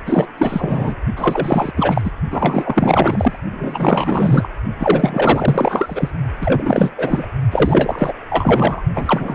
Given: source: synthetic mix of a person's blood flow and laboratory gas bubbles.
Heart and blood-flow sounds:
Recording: Doppler ultrasound of blood flow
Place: precordium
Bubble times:
0.05-0.28 s: bubbles
0.38-0.95 s: bubbles
1.16-1.72 s: bubbles
1.77-2.11 s: bubbles
2.30-3.40 s: bubbles
3.51-4.49 s: bubbles
4.79-6.11 s: bubbles
6.41-6.93 s: bubbles
6.98-7.27 s: bubbles
7.50-8.13 s: bubbles
8.29-8.82 s: bubbles
8.95-9.35 s: bubbles
From the record:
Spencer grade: 4 (maximum detectable bubble signal sounding continuously throughout systole and diastole of every cardiac period, and overriding the amplitude of the normal cardiac signals)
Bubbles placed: only in the low amplitude regions of the cardiac cycle

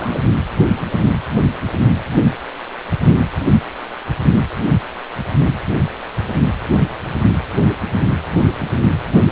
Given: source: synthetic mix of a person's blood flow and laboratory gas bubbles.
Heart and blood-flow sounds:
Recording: Doppler ultrasound of blood flow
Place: precordium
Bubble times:
0.00-0.27 s: bubbles
From the record:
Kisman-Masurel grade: 211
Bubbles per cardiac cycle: several, 3 to 8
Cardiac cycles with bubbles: 1 to 10%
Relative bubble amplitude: barely perceptible (0.100 to 0.250)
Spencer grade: 1 (occasional bubble signal discernible with the cardiac motion signal, with majority of cardiac periods free of bubbles)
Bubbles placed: anywhere in the cardiac cycle

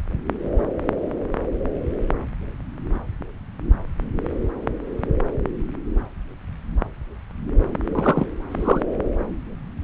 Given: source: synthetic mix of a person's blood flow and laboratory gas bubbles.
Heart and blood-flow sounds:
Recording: Doppler ultrasound of blood flow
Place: subclavian vein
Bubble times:
7.95-8.26 s: bubbles
8.51-8.82 s: bubbles
From the record:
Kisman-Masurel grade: 113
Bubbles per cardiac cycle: 1 to 2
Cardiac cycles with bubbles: 1 to 10%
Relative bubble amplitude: loud (0.450 to 0.775)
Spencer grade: 1 (occasional bubble signal discernible with the cardiac motion signal, with majority of cardiac periods free of bubbles)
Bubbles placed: anywhere in the cardiac cycle

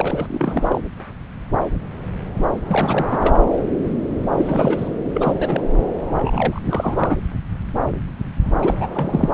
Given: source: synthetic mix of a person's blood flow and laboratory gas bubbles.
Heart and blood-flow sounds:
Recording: Doppler ultrasound of blood flow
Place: subclavian vein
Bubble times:
0.00-0.26 s: bubbles
0.29-0.81 s: bubbles
2.69-3.35 s: bubbles
4.37-4.91 s: bubbles
5.13-5.33 s: bubbles
5.39-5.63 s: bubbles
6.14-7.17 s: bubbles
8.61-8.74 s: bubbles
8.77-8.88 s: bubbles
8.95-9.29 s: bubbles
From the record:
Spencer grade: 3 (all of the cardiac periods contain showers or single bubble signals, but not dominating or overriding the cardiac motion signals)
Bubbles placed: anywhere in the cardiac cycle

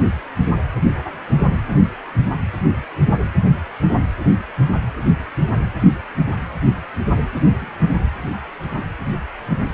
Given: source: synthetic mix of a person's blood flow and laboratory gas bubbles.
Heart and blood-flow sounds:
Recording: Doppler ultrasound of blood flow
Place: precordium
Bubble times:
7.58-7.78 s: bubbles
From the record:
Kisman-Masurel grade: 111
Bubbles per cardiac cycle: 1 to 2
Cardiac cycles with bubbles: 1 to 10%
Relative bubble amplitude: barely perceptible (0.100 to 0.250)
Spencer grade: 1 (occasional bubble signal discernible with the cardiac motion signal, with majority of cardiac periods free of bubbles)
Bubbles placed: anywhere in the cardiac cycle

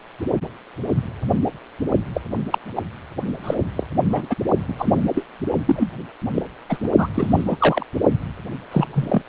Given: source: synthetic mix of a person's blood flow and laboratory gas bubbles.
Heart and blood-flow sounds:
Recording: Doppler ultrasound of blood flow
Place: precordium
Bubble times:
2.14-2.21 s: bubbles
2.50-2.58 s: bubbles
2.75-2.82 s: bubbles
3.43-3.54 s: bubbles
3.75-3.83 s: bubbles
4.12-4.25 s: bubbles
4.29-4.35 s: bubbles
4.68-4.74 s: bubbles
4.79-5.02 s: bubbles
5.13-5.23 s: bubbles
5.67-5.90 s: bubbles
6.35-6.42 s: bubbles
6.69-6.77 s: bubbles
6.83-6.90 s: bubbles
6.97-7.08 s: bubbles
7.14-7.44 s: bubbles
7.46-7.84 s: bubbles
8.71-8.86 s: bubbles
8.93-9.21 s: bubbles
From the record:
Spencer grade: 3 (all of the cardiac periods contain showers or single bubble signals, but not dominating or overriding the cardiac motion signals)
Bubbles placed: only in the low amplitude regions of the cardiac cycle

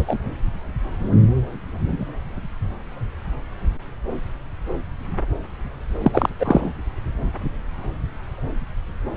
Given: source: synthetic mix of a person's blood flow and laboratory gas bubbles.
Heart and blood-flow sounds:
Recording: Doppler ultrasound of blood flow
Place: subclavian vein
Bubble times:
0.00-0.19 s: bubbles
6.03-6.29 s: bubbles
6.40-6.73 s: bubbles
From the record:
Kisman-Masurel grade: 223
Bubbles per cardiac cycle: several, 3 to 8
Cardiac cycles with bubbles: 10 to 50%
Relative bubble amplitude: loud (0.450 to 0.775)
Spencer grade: 2 (many but less than half of the cardiac periods contain bubble signals, singularly or in groups)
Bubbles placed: anywhere in the cardiac cycle

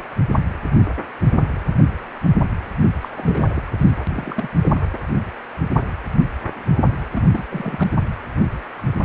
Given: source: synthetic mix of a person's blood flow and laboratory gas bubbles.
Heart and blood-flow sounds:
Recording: Doppler ultrasound of blood flow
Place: precordium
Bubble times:
3.01-3.50 s: bubbles
3.56-3.62 s: bubbles
3.78-3.92 s: bubbles
4.10-4.49 s: bubbles
4.63-4.80 s: bubbles
7.14-7.22 s: bubbles
7.32-7.43 s: bubbles
7.50-7.89 s: bubbles
From the record:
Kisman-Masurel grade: 221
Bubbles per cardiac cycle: several, 3 to 8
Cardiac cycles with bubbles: 10 to 50%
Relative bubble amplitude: barely perceptible (0.100 to 0.250)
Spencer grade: 2 (many but less than half of the cardiac periods contain bubble signals, singularly or in groups)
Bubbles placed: anywhere in the cardiac cycle

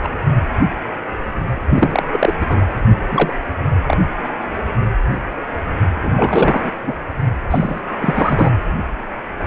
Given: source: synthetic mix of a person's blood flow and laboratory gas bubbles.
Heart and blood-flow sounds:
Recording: Doppler ultrasound of blood flow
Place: precordium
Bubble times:
0.03-0.09 s: bubbles
1.70-2.03 s: bubbles
2.12-2.33 s: bubbles
2.40-2.65 s: bubbles
3.11-3.33 s: bubbles
3.87-3.97 s: bubbles
5.95-6.13 s: bubbles
6.16-6.71 s: bubbles
6.82-6.94 s: bubbles
7.50-7.82 s: bubbles
8.00-8.50 s: bubbles
From the record:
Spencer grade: 3 (all of the cardiac periods contain showers or single bubble signals, but not dominating or overriding the cardiac motion signals)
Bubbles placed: anywhere in the cardiac cycle

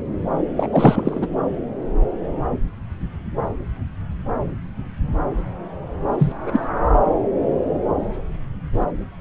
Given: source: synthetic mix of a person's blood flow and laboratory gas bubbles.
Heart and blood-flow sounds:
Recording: Doppler ultrasound of blood flow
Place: subclavian vein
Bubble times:
0.56-0.68 s: bubbles
0.71-1.27 s: bubbles
6.18-6.32 s: bubbles
6.46-6.60 s: bubbles
From the record:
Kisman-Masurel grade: 213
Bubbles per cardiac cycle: several, 3 to 8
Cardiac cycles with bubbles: 1 to 10%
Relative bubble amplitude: loud (0.450 to 0.775)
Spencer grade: 1 (occasional bubble signal discernible with the cardiac motion signal, with majority of cardiac periods free of bubbles)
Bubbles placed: anywhere in the cardiac cycle

